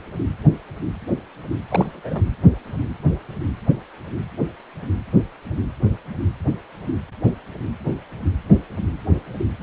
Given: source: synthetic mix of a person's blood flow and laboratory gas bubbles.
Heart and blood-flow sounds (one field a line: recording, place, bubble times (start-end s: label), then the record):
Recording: Doppler ultrasound of blood flow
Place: precordium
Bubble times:
1.71-2.23 s: bubbles
From the record:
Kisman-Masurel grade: 212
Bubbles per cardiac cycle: several, 3 to 8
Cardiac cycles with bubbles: 1 to 10%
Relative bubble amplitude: moderate (0.250 to 0.450)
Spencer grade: 1 (occasional bubble signal discernible with the cardiac motion signal, with majority of cardiac periods free of bubbles)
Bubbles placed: anywhere in the cardiac cycle